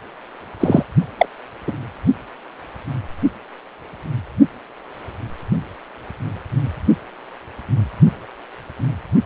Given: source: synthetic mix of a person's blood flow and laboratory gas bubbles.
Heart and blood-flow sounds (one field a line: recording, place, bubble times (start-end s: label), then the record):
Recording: Doppler ultrasound of blood flow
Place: precordium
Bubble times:
0.59-0.83 s: bubbles
1.18-1.26 s: bubbles
1.67-1.72 s: bubbles
From the record:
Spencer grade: 1 (occasional bubble signal discernible with the cardiac motion signal, with majority of cardiac periods free of bubbles)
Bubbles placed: only in the low amplitude regions of the cardiac cycle